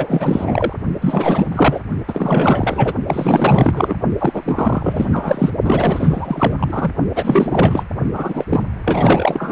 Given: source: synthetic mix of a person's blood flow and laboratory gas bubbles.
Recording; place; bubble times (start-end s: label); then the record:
Doppler ultrasound of blood flow; precordium
0.00-0.74 s: bubbles
1.01-1.80 s: bubbles
2.07-2.93 s: bubbles
3.08-3.95 s: bubbles
4.19-5.50 s: bubbles
5.63-6.92 s: bubbles
7.15-7.85 s: bubbles
8.13-8.45 s: bubbles
8.49-8.62 s: bubbles
8.86-9.51 s: bubbles
From the record:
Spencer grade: 4 (maximum detectable bubble signal sounding continuously throughout systole and diastole of every cardiac period, and overriding the amplitude of the normal cardiac signals); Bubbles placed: only in the low amplitude regions of the cardiac cycle